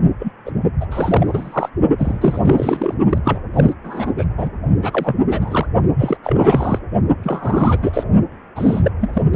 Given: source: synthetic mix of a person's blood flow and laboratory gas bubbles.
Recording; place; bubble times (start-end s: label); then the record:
Doppler ultrasound of blood flow; precordium
0.19-0.32 s: bubbles
0.45-0.51 s: bubbles
0.80-0.86 s: bubbles
0.91-1.70 s: bubbles
1.98-2.95 s: bubbles
3.09-3.18 s: bubbles
3.25-3.40 s: bubbles
3.54-3.73 s: bubbles
3.83-4.13 s: bubbles
4.17-4.25 s: bubbles
4.37-4.50 s: bubbles
4.81-5.15 s: bubbles
5.29-5.66 s: bubbles
5.98-6.17 s: bubbles
6.23-6.79 s: bubbles
7.23-7.79 s: bubbles
7.82-8.04 s: bubbles
8.55-8.90 s: bubbles
9.00-9.11 s: bubbles
9.13-9.22 s: bubbles
9.33-9.36 s: bubbles
From the record:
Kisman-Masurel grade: 342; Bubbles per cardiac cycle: rolling drumbeat, 9 or more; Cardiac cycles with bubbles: 100%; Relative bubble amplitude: moderate (0.250 to 0.450); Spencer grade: 3 (all of the cardiac periods contain showers or single bubble signals, but not dominating or overriding the cardiac motion signals); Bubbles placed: only in the low amplitude regions of the cardiac cycle